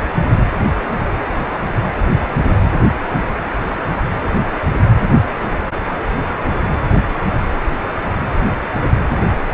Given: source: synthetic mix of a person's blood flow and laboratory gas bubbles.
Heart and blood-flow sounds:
Doppler ultrasound of blood flow; precordium
no bubbles
From the record:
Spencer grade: 0 (complete lack of bubble signals)

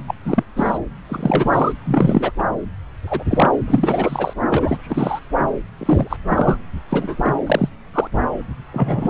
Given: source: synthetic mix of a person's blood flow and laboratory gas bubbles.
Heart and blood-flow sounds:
Doppler ultrasound of blood flow; subclavian vein
0.07-0.15 s: bubbles
0.24-0.44 s: bubbles
0.56-0.78 s: bubbles
1.08-1.50 s: bubbles
1.53-1.72 s: bubbles
1.84-2.32 s: bubbles
2.38-2.43 s: bubbles
3.07-3.24 s: bubbles
3.30-3.51 s: bubbles
3.67-4.33 s: bubbles
4.50-4.79 s: bubbles
4.83-5.19 s: bubbles
5.77-6.17 s: bubbles
6.26-6.57 s: bubbles
6.89-7.32 s: bubbles
7.46-7.69 s: bubbles
7.94-8.07 s: bubbles
8.73-9.10 s: bubbles
From the record:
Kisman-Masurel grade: 243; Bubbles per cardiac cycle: several, 3 to 8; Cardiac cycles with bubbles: 100%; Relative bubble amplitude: loud (0.450 to 0.775); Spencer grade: 3 (all of the cardiac periods contain showers or single bubble signals, but not dominating or overriding the cardiac motion signals); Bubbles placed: anywhere in the cardiac cycle

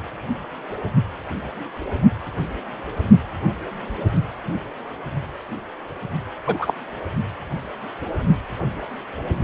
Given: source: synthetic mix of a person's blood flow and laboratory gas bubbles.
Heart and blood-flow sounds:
Doppler ultrasound of blood flow; precordium
6.46-6.74 s: bubbles
From the record:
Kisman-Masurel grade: 213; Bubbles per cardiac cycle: several, 3 to 8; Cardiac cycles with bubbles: 1 to 10%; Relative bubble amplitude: loud (0.450 to 0.775); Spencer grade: 1 (occasional bubble signal discernible with the cardiac motion signal, with majority of cardiac periods free of bubbles); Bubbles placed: anywhere in the cardiac cycle

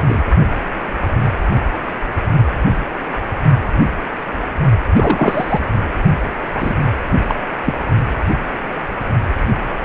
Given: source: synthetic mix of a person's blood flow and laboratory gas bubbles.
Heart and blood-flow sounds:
Doppler ultrasound of blood flow; precordium
0.05-0.23 s: bubbles
4.96-5.59 s: bubbles
6.55-6.75 s: bubbles
7.28-7.34 s: bubbles
7.66-7.74 s: bubbles
From the record:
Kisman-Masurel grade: 223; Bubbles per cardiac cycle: several, 3 to 8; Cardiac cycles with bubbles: 10 to 50%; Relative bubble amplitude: loud (0.450 to 0.775); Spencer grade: 2 (many but less than half of the cardiac periods contain bubble signals, singularly or in groups); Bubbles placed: only in the low amplitude regions of the cardiac cycle

